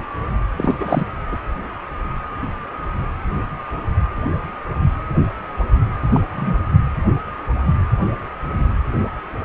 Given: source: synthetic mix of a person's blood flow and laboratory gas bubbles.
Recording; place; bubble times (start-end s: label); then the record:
Doppler ultrasound of blood flow; precordium
0.57-0.77 s: bubbles
0.80-1.08 s: bubbles
1.32-1.37 s: bubbles
6.11-6.21 s: bubbles
6.36-6.56 s: bubbles
From the record:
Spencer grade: 2 (many but less than half of the cardiac periods contain bubble signals, singularly or in groups); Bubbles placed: anywhere in the cardiac cycle